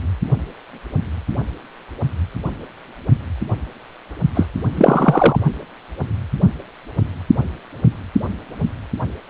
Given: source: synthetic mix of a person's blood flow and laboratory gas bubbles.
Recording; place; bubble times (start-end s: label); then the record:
Doppler ultrasound of blood flow; precordium
4.34-4.46 s: bubbles
4.76-5.40 s: bubbles
From the record:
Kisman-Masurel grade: 213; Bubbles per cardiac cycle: several, 3 to 8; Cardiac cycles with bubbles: 1 to 10%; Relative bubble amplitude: loud (0.450 to 0.775); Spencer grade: 1 (occasional bubble signal discernible with the cardiac motion signal, with majority of cardiac periods free of bubbles); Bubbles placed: only in the low amplitude regions of the cardiac cycle